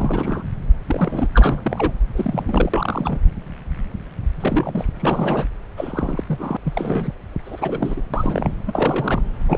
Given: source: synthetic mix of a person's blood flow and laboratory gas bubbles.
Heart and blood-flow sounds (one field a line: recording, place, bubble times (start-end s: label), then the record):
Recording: Doppler ultrasound of blood flow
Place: subclavian vein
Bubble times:
0.00-0.43 s: bubbles
0.86-1.28 s: bubbles
1.34-1.93 s: bubbles
2.15-3.21 s: bubbles
4.40-4.84 s: bubbles
5.00-5.47 s: bubbles
5.76-6.24 s: bubbles
6.26-6.57 s: bubbles
6.65-7.14 s: bubbles
7.45-8.02 s: bubbles
8.13-8.53 s: bubbles
8.66-9.21 s: bubbles
9.46-9.58 s: bubbles
From the record:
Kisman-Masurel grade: 332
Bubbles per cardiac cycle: rolling drumbeat, 9 or more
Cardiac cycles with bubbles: 50 to 99%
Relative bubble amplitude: moderate (0.250 to 0.450)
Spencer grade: 3 (all of the cardiac periods contain showers or single bubble signals, but not dominating or overriding the cardiac motion signals)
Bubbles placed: anywhere in the cardiac cycle